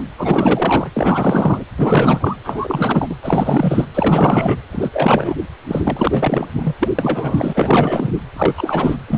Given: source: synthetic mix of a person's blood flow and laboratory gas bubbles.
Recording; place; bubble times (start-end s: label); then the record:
Doppler ultrasound of blood flow; precordium
0.00-0.03 s: bubbles
0.18-0.90 s: bubbles
0.96-1.65 s: bubbles
1.77-2.36 s: bubbles
2.44-3.15 s: bubbles
3.22-3.85 s: bubbles
3.94-4.62 s: bubbles
4.72-4.90 s: bubbles
4.93-5.36 s: bubbles
5.68-6.46 s: bubbles
6.53-6.74 s: bubbles
6.79-6.91 s: bubbles
6.99-8.13 s: bubbles
8.36-8.54 s: bubbles
8.57-8.97 s: bubbles
9.08-9.18 s: bubbles
From the record:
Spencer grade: 4 (maximum detectable bubble signal sounding continuously throughout systole and diastole of every cardiac period, and overriding the amplitude of the normal cardiac signals); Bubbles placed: anywhere in the cardiac cycle